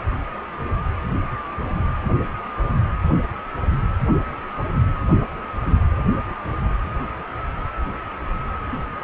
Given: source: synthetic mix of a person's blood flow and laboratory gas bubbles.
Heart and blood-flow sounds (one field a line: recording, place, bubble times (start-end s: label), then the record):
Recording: Doppler ultrasound of blood flow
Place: precordium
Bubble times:
no bubbles
From the record:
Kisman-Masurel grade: 000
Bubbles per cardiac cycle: 0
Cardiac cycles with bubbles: 0%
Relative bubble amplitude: no bubbles discernible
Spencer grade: 0 (complete lack of bubble signals)